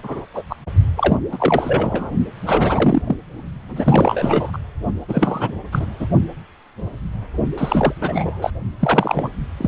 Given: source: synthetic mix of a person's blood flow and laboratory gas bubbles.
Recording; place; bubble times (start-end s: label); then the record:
Doppler ultrasound of blood flow; precordium
0.00-0.26 s: bubbles
0.33-0.43 s: bubbles
0.49-0.56 s: bubbles
0.96-1.18 s: bubbles
1.31-2.11 s: bubbles
2.46-3.02 s: bubbles
3.06-3.17 s: bubbles
3.69-4.58 s: bubbles
5.08-5.51 s: bubbles
5.71-5.86 s: bubbles
5.99-6.07 s: bubbles
7.58-7.93 s: bubbles
8.01-8.50 s: bubbles
8.79-9.32 s: bubbles
9.57-9.68 s: bubbles
From the record:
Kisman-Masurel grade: 332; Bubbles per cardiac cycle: rolling drumbeat, 9 or more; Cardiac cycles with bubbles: 50 to 99%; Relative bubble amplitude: moderate (0.250 to 0.450); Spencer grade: 3 (all of the cardiac periods contain showers or single bubble signals, but not dominating or overriding the cardiac motion signals); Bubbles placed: only in the low amplitude regions of the cardiac cycle